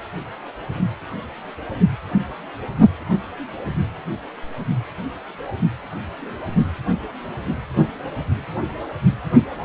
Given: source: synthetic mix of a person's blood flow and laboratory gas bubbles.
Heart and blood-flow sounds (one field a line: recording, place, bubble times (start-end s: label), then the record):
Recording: Doppler ultrasound of blood flow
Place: precordium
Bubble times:
no bubbles
From the record:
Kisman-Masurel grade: 000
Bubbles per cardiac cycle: 0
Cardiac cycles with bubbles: 0%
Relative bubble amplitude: no bubbles discernible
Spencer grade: 0 (complete lack of bubble signals)